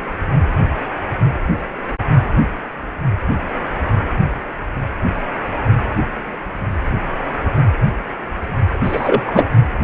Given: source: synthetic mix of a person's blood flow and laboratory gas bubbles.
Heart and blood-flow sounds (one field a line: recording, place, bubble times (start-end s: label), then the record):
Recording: Doppler ultrasound of blood flow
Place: precordium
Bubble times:
8.83-9.49 s: bubbles
From the record:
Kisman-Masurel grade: 213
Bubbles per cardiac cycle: several, 3 to 8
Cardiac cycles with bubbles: 1 to 10%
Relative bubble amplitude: loud (0.450 to 0.775)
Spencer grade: 1 (occasional bubble signal discernible with the cardiac motion signal, with majority of cardiac periods free of bubbles)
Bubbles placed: anywhere in the cardiac cycle